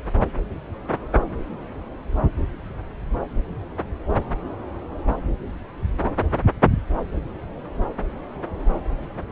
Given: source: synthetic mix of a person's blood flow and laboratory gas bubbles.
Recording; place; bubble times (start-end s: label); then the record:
Doppler ultrasound of blood flow; subclavian vein
no bubbles
From the record:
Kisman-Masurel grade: 000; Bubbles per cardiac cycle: 0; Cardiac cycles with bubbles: 0%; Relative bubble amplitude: no bubbles discernible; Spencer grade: 0 (complete lack of bubble signals)